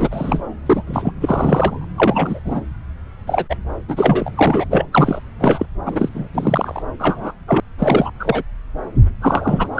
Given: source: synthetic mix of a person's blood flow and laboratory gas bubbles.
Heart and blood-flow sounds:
Doppler ultrasound of blood flow; subclavian vein
0.00-0.41 s: bubbles
0.66-0.83 s: bubbles
0.87-1.11 s: bubbles
1.21-1.85 s: bubbles
1.97-2.40 s: bubbles
2.44-2.60 s: bubbles
3.27-3.45 s: bubbles
3.49-3.56 s: bubbles
3.88-4.32 s: bubbles
4.35-4.65 s: bubbles
4.71-4.85 s: bubbles
4.93-5.21 s: bubbles
5.41-5.66 s: bubbles
5.85-6.09 s: bubbles
6.14-6.28 s: bubbles
6.33-6.83 s: bubbles
7.00-7.32 s: bubbles
7.47-7.60 s: bubbles
7.79-8.10 s: bubbles
8.20-8.43 s: bubbles
9.21-9.71 s: bubbles
9.75-9.80 s: bubbles
From the record:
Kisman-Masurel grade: 233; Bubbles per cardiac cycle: several, 3 to 8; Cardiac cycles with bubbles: 50 to 99%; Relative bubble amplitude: loud (0.450 to 0.775); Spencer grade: 3 (all of the cardiac periods contain showers or single bubble signals, but not dominating or overriding the cardiac motion signals); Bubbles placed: anywhere in the cardiac cycle

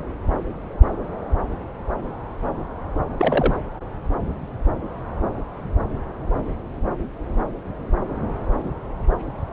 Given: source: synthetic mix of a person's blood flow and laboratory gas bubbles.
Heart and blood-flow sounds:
Doppler ultrasound of blood flow; subclavian vein
3.19-3.54 s: bubbles
From the record:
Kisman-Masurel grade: 122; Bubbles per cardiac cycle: 1 to 2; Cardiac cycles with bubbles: 10 to 50%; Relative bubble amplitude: moderate (0.250 to 0.450); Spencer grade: 2 (many but less than half of the cardiac periods contain bubble signals, singularly or in groups); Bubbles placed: anywhere in the cardiac cycle

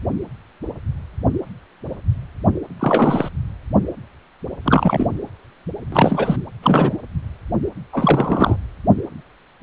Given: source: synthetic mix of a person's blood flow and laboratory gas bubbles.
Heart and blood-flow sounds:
Doppler ultrasound of blood flow; precordium
2.79-3.29 s: bubbles
4.64-5.07 s: bubbles
5.92-6.36 s: bubbles
6.62-6.96 s: bubbles
7.92-8.56 s: bubbles
From the record:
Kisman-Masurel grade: 223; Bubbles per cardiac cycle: several, 3 to 8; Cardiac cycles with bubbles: 10 to 50%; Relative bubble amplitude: loud (0.450 to 0.775); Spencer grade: 2 (many but less than half of the cardiac periods contain bubble signals, singularly or in groups); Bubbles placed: anywhere in the cardiac cycle

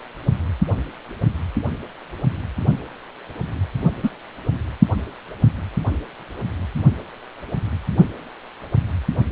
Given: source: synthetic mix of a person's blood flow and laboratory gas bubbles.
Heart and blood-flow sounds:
Doppler ultrasound of blood flow; precordium
4.03-4.10 s: bubbles
From the record:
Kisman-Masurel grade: 123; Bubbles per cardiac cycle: 1 to 2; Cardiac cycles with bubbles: 10 to 50%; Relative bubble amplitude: loud (0.450 to 0.775); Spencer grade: 2 (many but less than half of the cardiac periods contain bubble signals, singularly or in groups); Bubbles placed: only in the low amplitude regions of the cardiac cycle

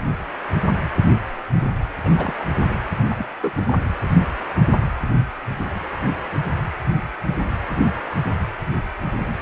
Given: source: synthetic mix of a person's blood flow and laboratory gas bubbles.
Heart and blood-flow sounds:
Doppler ultrasound of blood flow; precordium
2.04-2.35 s: bubbles
2.38-2.44 s: bubbles
3.09-3.26 s: bubbles
3.42-3.52 s: bubbles
3.56-3.64 s: bubbles
3.67-3.74 s: bubbles
From the record:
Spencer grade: 2 (many but less than half of the cardiac periods contain bubble signals, singularly or in groups); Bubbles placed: anywhere in the cardiac cycle

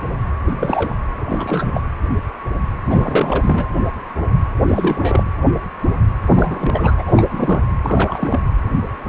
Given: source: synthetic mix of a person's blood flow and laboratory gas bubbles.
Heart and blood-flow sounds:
Doppler ultrasound of blood flow; precordium
0.45-0.54 s: bubbles
0.59-0.96 s: bubbles
1.20-1.82 s: bubbles
2.86-3.68 s: bubbles
4.68-5.23 s: bubbles
6.28-7.04 s: bubbles
7.07-7.62 s: bubbles
7.85-8.47 s: bubbles
From the record:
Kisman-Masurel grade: 332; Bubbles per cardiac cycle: rolling drumbeat, 9 or more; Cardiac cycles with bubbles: 50 to 99%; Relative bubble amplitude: moderate (0.250 to 0.450); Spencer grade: 3 (all of the cardiac periods contain showers or single bubble signals, but not dominating or overriding the cardiac motion signals); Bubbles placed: anywhere in the cardiac cycle

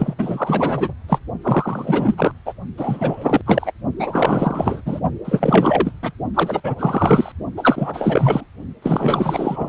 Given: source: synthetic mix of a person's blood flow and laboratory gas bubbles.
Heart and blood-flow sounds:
Doppler ultrasound of blood flow; precordium
0.00-0.14 s: bubbles
0.18-0.93 s: bubbles
1.09-1.19 s: bubbles
1.43-2.31 s: bubbles
2.46-2.54 s: bubbles
2.77-3.41 s: bubbles
3.46-3.73 s: bubbles
3.98-4.81 s: bubbles
4.85-5.00 s: bubbles
5.24-5.93 s: bubbles
6.02-6.12 s: bubbles
6.34-6.60 s: bubbles
6.63-6.75 s: bubbles
6.78-7.32 s: bubbles
7.56-8.46 s: bubbles
8.82-9.69 s: bubbles
From the record:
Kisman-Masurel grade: 444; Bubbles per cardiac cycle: continuous sound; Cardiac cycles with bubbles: 100%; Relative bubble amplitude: maximal (0.775 to 0.999); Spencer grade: 4 (maximum detectable bubble signal sounding continuously throughout systole and diastole of every cardiac period, and overriding the amplitude of the normal cardiac signals); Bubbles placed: only in the low amplitude regions of the cardiac cycle

